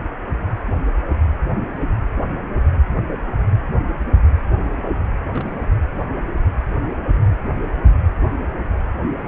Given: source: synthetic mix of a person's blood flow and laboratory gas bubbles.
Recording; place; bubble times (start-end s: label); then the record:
Doppler ultrasound of blood flow; precordium
5.33-5.67 s: bubbles
5.82-5.88 s: bubbles
From the record:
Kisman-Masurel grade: 211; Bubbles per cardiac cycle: several, 3 to 8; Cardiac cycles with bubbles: 1 to 10%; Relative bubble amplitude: barely perceptible (0.100 to 0.250); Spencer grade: 1 (occasional bubble signal discernible with the cardiac motion signal, with majority of cardiac periods free of bubbles); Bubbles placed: anywhere in the cardiac cycle